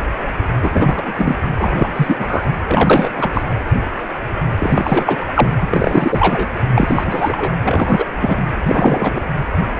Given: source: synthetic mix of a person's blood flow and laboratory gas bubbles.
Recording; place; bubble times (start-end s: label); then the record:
Doppler ultrasound of blood flow; precordium
0.61-1.13 s: bubbles
1.18-1.36 s: bubbles
1.59-1.88 s: bubbles
1.96-2.44 s: bubbles
2.68-3.09 s: bubbles
3.15-3.29 s: bubbles
3.33-3.44 s: bubbles
3.50-3.55 s: bubbles
4.59-5.17 s: bubbles
5.28-5.33 s: bubbles
5.35-5.50 s: bubbles
5.61-5.68 s: bubbles
5.71-6.49 s: bubbles
6.75-7.53 s: bubbles
7.64-8.06 s: bubbles
8.20-8.41 s: bubbles
8.66-9.21 s: bubbles
From the record:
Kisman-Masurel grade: 333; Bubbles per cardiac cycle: rolling drumbeat, 9 or more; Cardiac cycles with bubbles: 50 to 99%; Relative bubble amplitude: loud (0.450 to 0.775); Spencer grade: 3 (all of the cardiac periods contain showers or single bubble signals, but not dominating or overriding the cardiac motion signals); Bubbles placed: anywhere in the cardiac cycle